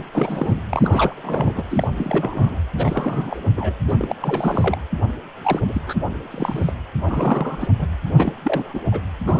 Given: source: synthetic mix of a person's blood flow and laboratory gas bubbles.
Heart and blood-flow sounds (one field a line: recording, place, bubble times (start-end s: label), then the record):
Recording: Doppler ultrasound of blood flow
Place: precordium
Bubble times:
0.00-0.03 s: bubbles
0.13-0.61 s: bubbles
0.69-1.64 s: bubbles
1.70-1.87 s: bubbles
1.97-2.59 s: bubbles
2.76-3.40 s: bubbles
3.56-3.75 s: bubbles
3.88-4.15 s: bubbles
4.22-4.78 s: bubbles
5.42-5.60 s: bubbles
5.68-5.81 s: bubbles
5.86-5.94 s: bubbles
6.30-6.71 s: bubbles
7.06-7.67 s: bubbles
7.79-7.87 s: bubbles
8.18-8.33 s: bubbles
8.42-8.79 s: bubbles
8.91-9.02 s: bubbles
9.26-9.40 s: bubbles
From the record:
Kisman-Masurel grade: 342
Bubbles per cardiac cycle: rolling drumbeat, 9 or more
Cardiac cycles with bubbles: 100%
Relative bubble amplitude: moderate (0.250 to 0.450)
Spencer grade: 3 (all of the cardiac periods contain showers or single bubble signals, but not dominating or overriding the cardiac motion signals)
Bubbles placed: anywhere in the cardiac cycle